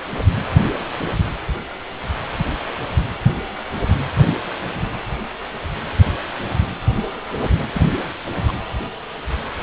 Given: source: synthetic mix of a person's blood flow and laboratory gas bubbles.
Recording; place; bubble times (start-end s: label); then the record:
Doppler ultrasound of blood flow; precordium
7.74-7.80 s: bubbles
7.83-7.98 s: bubbles
8.48-8.53 s: bubbles
From the record:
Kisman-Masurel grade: 212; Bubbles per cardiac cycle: several, 3 to 8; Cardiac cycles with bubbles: 1 to 10%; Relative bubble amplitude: moderate (0.250 to 0.450); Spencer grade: 1 (occasional bubble signal discernible with the cardiac motion signal, with majority of cardiac periods free of bubbles); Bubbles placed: anywhere in the cardiac cycle